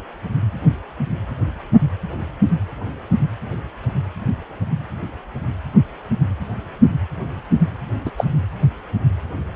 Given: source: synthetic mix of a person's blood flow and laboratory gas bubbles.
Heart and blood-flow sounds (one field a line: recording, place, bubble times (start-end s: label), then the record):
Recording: Doppler ultrasound of blood flow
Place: precordium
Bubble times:
8.05-8.11 s: bubbles
8.17-8.24 s: bubbles
From the record:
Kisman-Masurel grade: 123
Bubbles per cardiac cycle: 1 to 2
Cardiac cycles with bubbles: 10 to 50%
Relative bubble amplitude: loud (0.450 to 0.775)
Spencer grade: 2 (many but less than half of the cardiac periods contain bubble signals, singularly or in groups)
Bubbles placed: anywhere in the cardiac cycle